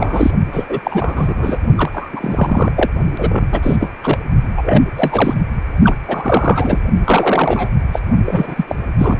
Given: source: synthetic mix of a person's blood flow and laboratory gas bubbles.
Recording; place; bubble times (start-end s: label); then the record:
Doppler ultrasound of blood flow; precordium
0.00-0.31 s: bubbles
0.52-0.80 s: bubbles
0.84-1.58 s: bubbles
1.75-2.72 s: bubbles
2.75-2.90 s: bubbles
3.18-3.60 s: bubbles
3.62-3.76 s: bubbles
3.80-3.90 s: bubbles
4.04-4.18 s: bubbles
4.56-4.83 s: bubbles
4.96-5.34 s: bubbles
5.82-5.95 s: bubbles
6.08-6.79 s: bubbles
7.04-7.68 s: bubbles
7.92-8.00 s: bubbles
8.26-8.65 s: bubbles
8.68-8.76 s: bubbles
8.98-9.20 s: bubbles
From the record:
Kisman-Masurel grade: 343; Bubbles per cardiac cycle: rolling drumbeat, 9 or more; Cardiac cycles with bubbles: 100%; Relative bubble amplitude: loud (0.450 to 0.775); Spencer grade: 3 (all of the cardiac periods contain showers or single bubble signals, but not dominating or overriding the cardiac motion signals); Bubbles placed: only in the low amplitude regions of the cardiac cycle